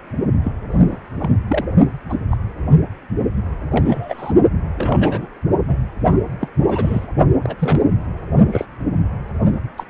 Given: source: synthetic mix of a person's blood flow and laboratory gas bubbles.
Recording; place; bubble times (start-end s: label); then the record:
Doppler ultrasound of blood flow; precordium
0.44-0.53 s: bubbles
0.71-0.82 s: bubbles
0.91-0.97 s: bubbles
1.19-1.30 s: bubbles
1.47-1.65 s: bubbles
2.09-2.15 s: bubbles
2.30-2.37 s: bubbles
2.71-2.76 s: bubbles
3.71-4.33 s: bubbles
4.76-5.28 s: bubbles
5.68-5.78 s: bubbles
6.08-6.21 s: bubbles
6.41-6.48 s: bubbles
6.67-7.07 s: bubbles
7.43-7.56 s: bubbles
7.58-7.82 s: bubbles
8.52-8.65 s: bubbles
9.77-9.85 s: bubbles
From the record:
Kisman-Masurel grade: 242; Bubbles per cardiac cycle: several, 3 to 8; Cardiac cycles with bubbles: 100%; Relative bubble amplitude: moderate (0.250 to 0.450); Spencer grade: 3 (all of the cardiac periods contain showers or single bubble signals, but not dominating or overriding the cardiac motion signals); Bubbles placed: only in the low amplitude regions of the cardiac cycle